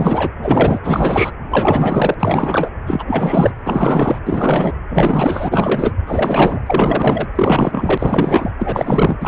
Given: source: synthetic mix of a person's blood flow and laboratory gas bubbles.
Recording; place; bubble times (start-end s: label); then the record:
Doppler ultrasound of blood flow; precordium
0.00-0.32 s: bubbles
0.42-0.79 s: bubbles
0.83-1.31 s: bubbles
1.50-2.15 s: bubbles
2.19-2.69 s: bubbles
2.86-3.04 s: bubbles
3.07-3.51 s: bubbles
3.66-4.19 s: bubbles
4.25-4.73 s: bubbles
4.89-5.92 s: bubbles
6.06-6.60 s: bubbles
6.66-7.26 s: bubbles
7.35-8.51 s: bubbles
8.59-9.16 s: bubbles
9.21-9.28 s: bubbles
From the record:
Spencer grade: 4 (maximum detectable bubble signal sounding continuously throughout systole and diastole of every cardiac period, and overriding the amplitude of the normal cardiac signals); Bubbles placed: anywhere in the cardiac cycle